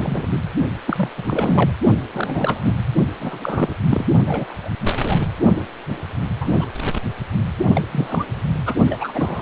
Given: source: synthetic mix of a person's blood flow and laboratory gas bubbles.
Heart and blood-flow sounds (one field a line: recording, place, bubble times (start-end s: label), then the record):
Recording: Doppler ultrasound of blood flow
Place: precordium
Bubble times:
0.00-0.26 s: bubbles
0.29-0.40 s: bubbles
0.86-1.09 s: bubbles
1.17-1.23 s: bubbles
1.26-1.71 s: bubbles
2.13-2.61 s: bubbles
2.64-2.77 s: bubbles
3.19-3.76 s: bubbles
3.91-4.05 s: bubbles
4.26-4.69 s: bubbles
4.86-5.25 s: bubbles
6.41-6.66 s: bubbles
7.75-7.82 s: bubbles
7.91-8.25 s: bubbles
8.66-8.74 s: bubbles
8.88-9.42 s: bubbles
From the record:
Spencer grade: 3 (all of the cardiac periods contain showers or single bubble signals, but not dominating or overriding the cardiac motion signals)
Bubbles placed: only in the low amplitude regions of the cardiac cycle